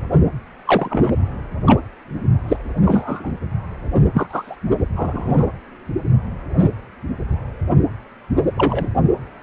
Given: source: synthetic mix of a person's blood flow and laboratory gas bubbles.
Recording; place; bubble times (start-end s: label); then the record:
Doppler ultrasound of blood flow; precordium
0.66-1.11 s: bubbles
1.66-1.80 s: bubbles
2.48-2.56 s: bubbles
2.85-3.32 s: bubbles
4.14-4.26 s: bubbles
4.29-4.55 s: bubbles
4.96-5.46 s: bubbles
8.57-8.89 s: bubbles
From the record:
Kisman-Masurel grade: 123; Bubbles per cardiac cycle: 1 to 2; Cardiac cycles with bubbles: 10 to 50%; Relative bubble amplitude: loud (0.450 to 0.775); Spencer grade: 2 (many but less than half of the cardiac periods contain bubble signals, singularly or in groups); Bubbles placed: anywhere in the cardiac cycle